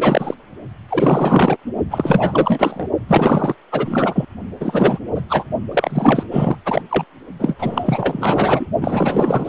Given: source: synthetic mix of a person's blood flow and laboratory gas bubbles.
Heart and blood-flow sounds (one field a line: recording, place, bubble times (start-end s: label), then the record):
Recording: Doppler ultrasound of blood flow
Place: precordium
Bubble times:
0.00-0.34 s: bubbles
0.89-1.56 s: bubbles
1.90-2.88 s: bubbles
3.08-3.55 s: bubbles
3.72-4.25 s: bubbles
4.60-5.00 s: bubbles
5.15-5.21 s: bubbles
5.29-5.45 s: bubbles
5.71-6.23 s: bubbles
6.31-6.56 s: bubbles
6.65-6.81 s: bubbles
6.89-7.04 s: bubbles
7.38-7.55 s: bubbles
7.58-8.67 s: bubbles
8.80-9.49 s: bubbles
From the record:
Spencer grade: 4 (maximum detectable bubble signal sounding continuously throughout systole and diastole of every cardiac period, and overriding the amplitude of the normal cardiac signals)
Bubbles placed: only in the low amplitude regions of the cardiac cycle